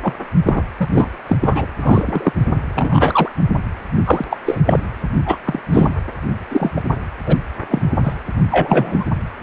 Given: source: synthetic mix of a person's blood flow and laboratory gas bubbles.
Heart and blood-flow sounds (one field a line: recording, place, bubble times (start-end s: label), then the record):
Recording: Doppler ultrasound of blood flow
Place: precordium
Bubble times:
0.03-0.14 s: bubbles
0.46-0.62 s: bubbles
0.80-0.88 s: bubbles
0.92-1.07 s: bubbles
1.27-1.38 s: bubbles
1.41-1.66 s: bubbles
1.79-2.33 s: bubbles
2.75-3.29 s: bubbles
4.05-4.25 s: bubbles
4.30-4.38 s: bubbles
4.46-4.61 s: bubbles
4.66-4.79 s: bubbles
5.26-5.38 s: bubbles
5.46-5.60 s: bubbles
5.71-5.89 s: bubbles
6.50-6.72 s: bubbles
6.76-6.82 s: bubbles
7.26-7.37 s: bubbles
7.68-7.87 s: bubbles
8.03-8.13 s: bubbles
8.49-9.04 s: bubbles
From the record:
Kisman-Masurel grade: 243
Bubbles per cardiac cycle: several, 3 to 8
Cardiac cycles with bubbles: 100%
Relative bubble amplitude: loud (0.450 to 0.775)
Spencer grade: 3 (all of the cardiac periods contain showers or single bubble signals, but not dominating or overriding the cardiac motion signals)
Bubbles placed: anywhere in the cardiac cycle